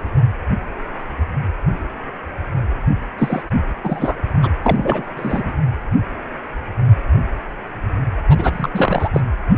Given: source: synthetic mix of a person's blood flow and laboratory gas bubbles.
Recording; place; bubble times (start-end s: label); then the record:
Doppler ultrasound of blood flow; precordium
3.18-3.42 s: bubbles
3.83-4.17 s: bubbles
4.42-4.47 s: bubbles
4.62-5.05 s: bubbles
5.16-5.54 s: bubbles
8.28-9.09 s: bubbles
9.13-9.21 s: bubbles
From the record:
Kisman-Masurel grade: 333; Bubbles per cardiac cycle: rolling drumbeat, 9 or more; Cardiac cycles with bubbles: 50 to 99%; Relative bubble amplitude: loud (0.450 to 0.775); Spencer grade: 3 (all of the cardiac periods contain showers or single bubble signals, but not dominating or overriding the cardiac motion signals); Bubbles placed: anywhere in the cardiac cycle